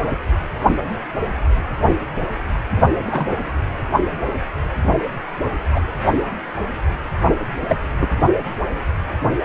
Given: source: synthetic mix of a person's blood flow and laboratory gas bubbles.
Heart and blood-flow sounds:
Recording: Doppler ultrasound of blood flow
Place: precordium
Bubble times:
3.07-3.50 s: bubbles
5.73-5.81 s: bubbles
7.68-7.76 s: bubbles
8.00-8.09 s: bubbles
From the record:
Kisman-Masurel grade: 122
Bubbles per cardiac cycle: 1 to 2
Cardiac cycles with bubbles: 10 to 50%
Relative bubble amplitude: moderate (0.250 to 0.450)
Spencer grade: 2 (many but less than half of the cardiac periods contain bubble signals, singularly or in groups)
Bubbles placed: only in the low amplitude regions of the cardiac cycle

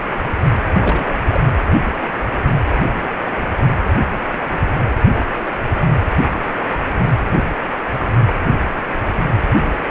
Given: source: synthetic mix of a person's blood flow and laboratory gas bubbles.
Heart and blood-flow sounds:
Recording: Doppler ultrasound of blood flow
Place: precordium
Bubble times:
0.80-1.17 s: bubbles
1.28-1.40 s: bubbles
From the record:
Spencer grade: 1 (occasional bubble signal discernible with the cardiac motion signal, with majority of cardiac periods free of bubbles)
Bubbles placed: anywhere in the cardiac cycle

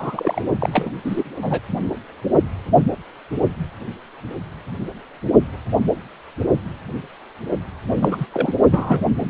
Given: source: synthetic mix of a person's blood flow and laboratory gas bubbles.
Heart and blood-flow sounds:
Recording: Doppler ultrasound of blood flow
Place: precordium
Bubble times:
0.00-0.42 s: bubbles
0.60-0.70 s: bubbles
0.72-0.94 s: bubbles
1.04-1.23 s: bubbles
1.42-1.61 s: bubbles
7.89-8.26 s: bubbles
8.33-8.53 s: bubbles
8.71-9.00 s: bubbles
9.20-9.30 s: bubbles
From the record:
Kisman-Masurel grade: 222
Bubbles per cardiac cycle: several, 3 to 8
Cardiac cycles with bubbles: 10 to 50%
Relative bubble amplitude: moderate (0.250 to 0.450)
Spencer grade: 2 (many but less than half of the cardiac periods contain bubble signals, singularly or in groups)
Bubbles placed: only in the low amplitude regions of the cardiac cycle

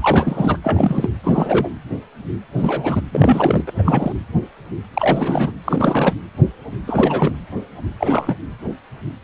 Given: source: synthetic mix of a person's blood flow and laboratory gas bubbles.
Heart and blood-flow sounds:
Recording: Doppler ultrasound of blood flow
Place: precordium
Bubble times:
0.02-0.57 s: bubbles
0.63-1.10 s: bubbles
1.23-1.69 s: bubbles
2.58-3.01 s: bubbles
3.11-3.64 s: bubbles
3.67-3.71 s: bubbles
3.78-4.12 s: bubbles
4.94-5.52 s: bubbles
5.65-6.14 s: bubbles
6.87-7.33 s: bubbles
7.98-8.36 s: bubbles
From the record:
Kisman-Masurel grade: 332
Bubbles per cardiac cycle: rolling drumbeat, 9 or more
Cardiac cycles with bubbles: 50 to 99%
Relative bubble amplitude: moderate (0.250 to 0.450)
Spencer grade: 3 (all of the cardiac periods contain showers or single bubble signals, but not dominating or overriding the cardiac motion signals)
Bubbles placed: anywhere in the cardiac cycle

